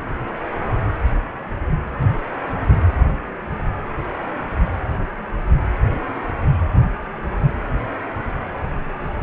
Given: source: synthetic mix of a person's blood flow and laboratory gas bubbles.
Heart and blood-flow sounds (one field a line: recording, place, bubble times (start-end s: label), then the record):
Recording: Doppler ultrasound of blood flow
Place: precordium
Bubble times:
no bubbles
From the record:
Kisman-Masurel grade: 000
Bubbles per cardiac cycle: 0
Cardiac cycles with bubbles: 0%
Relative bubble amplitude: no bubbles discernible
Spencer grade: 0 (complete lack of bubble signals)